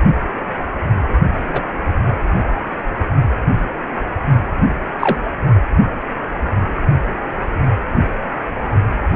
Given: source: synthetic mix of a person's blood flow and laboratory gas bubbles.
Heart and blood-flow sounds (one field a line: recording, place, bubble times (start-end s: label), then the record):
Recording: Doppler ultrasound of blood flow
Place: precordium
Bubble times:
1.49-1.61 s: bubbles
5.00-5.17 s: bubbles
From the record:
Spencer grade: 2 (many but less than half of the cardiac periods contain bubble signals, singularly or in groups)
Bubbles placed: only in the low amplitude regions of the cardiac cycle